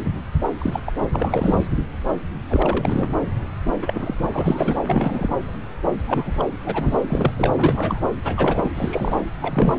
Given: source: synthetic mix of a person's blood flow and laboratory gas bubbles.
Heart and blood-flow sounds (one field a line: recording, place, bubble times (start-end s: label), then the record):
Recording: Doppler ultrasound of blood flow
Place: subclavian vein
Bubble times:
0.00-0.03 s: bubbles
0.58-0.80 s: bubbles
0.85-0.92 s: bubbles
1.13-1.55 s: bubbles
2.48-3.08 s: bubbles
3.82-4.28 s: bubbles
4.33-4.80 s: bubbles
4.85-5.35 s: bubbles
6.07-6.43 s: bubbles
6.63-6.98 s: bubbles
7.08-7.32 s: bubbles
7.37-7.53 s: bubbles
7.57-8.01 s: bubbles
8.24-8.71 s: bubbles
8.74-9.21 s: bubbles
9.41-9.79 s: bubbles
From the record:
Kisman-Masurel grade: 232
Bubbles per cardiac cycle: several, 3 to 8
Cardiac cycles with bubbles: 50 to 99%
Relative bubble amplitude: moderate (0.250 to 0.450)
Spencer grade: 3 (all of the cardiac periods contain showers or single bubble signals, but not dominating or overriding the cardiac motion signals)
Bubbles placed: anywhere in the cardiac cycle